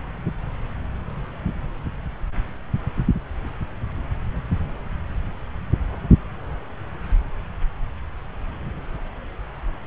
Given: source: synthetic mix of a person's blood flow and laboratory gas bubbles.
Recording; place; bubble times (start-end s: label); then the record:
Doppler ultrasound of blood flow; subclavian vein
no bubbles
From the record:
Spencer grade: 0 (complete lack of bubble signals)